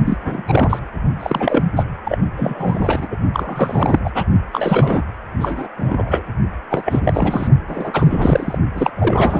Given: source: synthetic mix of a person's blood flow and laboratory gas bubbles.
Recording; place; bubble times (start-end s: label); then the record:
Doppler ultrasound of blood flow; precordium
0.05-0.18 s: bubbles
0.25-0.42 s: bubbles
0.47-0.80 s: bubbles
1.20-1.65 s: bubbles
1.75-1.83 s: bubbles
2.04-2.18 s: bubbles
2.37-3.08 s: bubbles
3.10-3.17 s: bubbles
3.33-3.99 s: bubbles
4.04-4.10 s: bubbles
4.14-4.24 s: bubbles
4.52-5.02 s: bubbles
5.41-5.67 s: bubbles
5.76-6.22 s: bubbles
6.70-7.47 s: bubbles
7.67-7.91 s: bubbles
7.93-8.59 s: bubbles
8.75-8.91 s: bubbles
8.95-9.40 s: bubbles
From the record:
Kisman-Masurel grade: 343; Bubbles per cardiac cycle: rolling drumbeat, 9 or more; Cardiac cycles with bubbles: 100%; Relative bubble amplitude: loud (0.450 to 0.775); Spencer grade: 3 (all of the cardiac periods contain showers or single bubble signals, but not dominating or overriding the cardiac motion signals); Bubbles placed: only in the low amplitude regions of the cardiac cycle